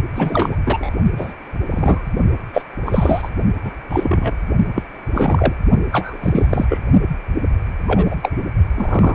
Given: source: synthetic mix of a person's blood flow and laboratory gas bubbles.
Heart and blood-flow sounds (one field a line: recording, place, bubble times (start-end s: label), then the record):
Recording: Doppler ultrasound of blood flow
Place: precordium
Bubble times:
0.16-0.56 s: bubbles
0.65-0.90 s: bubbles
1.17-1.34 s: bubbles
1.70-2.02 s: bubbles
2.53-2.62 s: bubbles
2.85-3.31 s: bubbles
3.64-3.71 s: bubbles
3.89-4.35 s: bubbles
4.75-4.83 s: bubbles
5.13-5.54 s: bubbles
5.91-6.17 s: bubbles
6.21-6.47 s: bubbles
6.50-6.65 s: bubbles
6.69-6.79 s: bubbles
7.87-8.15 s: bubbles
8.22-8.31 s: bubbles
8.74-9.14 s: bubbles
From the record:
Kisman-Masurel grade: 233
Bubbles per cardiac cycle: several, 3 to 8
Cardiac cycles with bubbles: 50 to 99%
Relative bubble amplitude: loud (0.450 to 0.775)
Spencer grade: 3 (all of the cardiac periods contain showers or single bubble signals, but not dominating or overriding the cardiac motion signals)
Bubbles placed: only in the low amplitude regions of the cardiac cycle